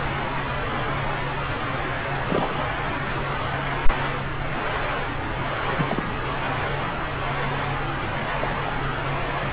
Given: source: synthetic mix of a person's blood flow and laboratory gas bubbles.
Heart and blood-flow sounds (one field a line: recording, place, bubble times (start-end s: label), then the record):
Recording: Doppler ultrasound of blood flow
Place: subclavian vein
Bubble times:
2.26-2.48 s: bubbles
5.71-6.13 s: bubbles
8.41-8.55 s: bubbles
8.66-8.73 s: bubbles
From the record:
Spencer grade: 2 (many but less than half of the cardiac periods contain bubble signals, singularly or in groups)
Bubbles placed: anywhere in the cardiac cycle